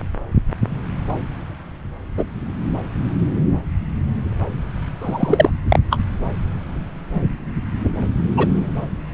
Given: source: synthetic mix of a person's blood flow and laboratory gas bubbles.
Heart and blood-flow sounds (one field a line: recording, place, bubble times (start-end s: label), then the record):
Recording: Doppler ultrasound of blood flow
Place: subclavian vein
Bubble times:
2.18-2.25 s: bubbles
5.01-5.50 s: bubbles
5.69-5.79 s: bubbles
5.90-5.98 s: bubbles
8.37-8.47 s: bubbles
From the record:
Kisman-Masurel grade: 123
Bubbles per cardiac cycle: 1 to 2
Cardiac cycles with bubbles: 10 to 50%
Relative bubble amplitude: loud (0.450 to 0.775)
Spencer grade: 2 (many but less than half of the cardiac periods contain bubble signals, singularly or in groups)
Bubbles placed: anywhere in the cardiac cycle